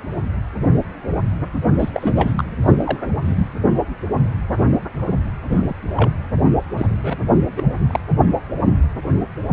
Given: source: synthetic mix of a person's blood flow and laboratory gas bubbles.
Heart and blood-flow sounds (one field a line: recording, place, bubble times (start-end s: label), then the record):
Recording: Doppler ultrasound of blood flow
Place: precordium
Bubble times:
1.79-1.90 s: bubbles
1.94-2.11 s: bubbles
2.15-2.44 s: bubbles
2.61-2.73 s: bubbles
2.77-2.98 s: bubbles
3.25-3.48 s: bubbles
5.50-5.74 s: bubbles
5.96-6.11 s: bubbles
6.78-6.86 s: bubbles
6.90-7.19 s: bubbles
7.57-7.64 s: bubbles
7.87-8.00 s: bubbles
From the record:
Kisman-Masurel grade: 222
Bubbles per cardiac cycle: several, 3 to 8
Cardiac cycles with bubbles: 10 to 50%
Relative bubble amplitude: moderate (0.250 to 0.450)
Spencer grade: 2 (many but less than half of the cardiac periods contain bubble signals, singularly or in groups)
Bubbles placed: anywhere in the cardiac cycle